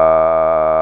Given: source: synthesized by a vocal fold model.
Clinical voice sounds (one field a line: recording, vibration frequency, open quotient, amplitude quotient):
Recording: sustained vowel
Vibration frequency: 80 Hz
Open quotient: 0.1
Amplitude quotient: 1.2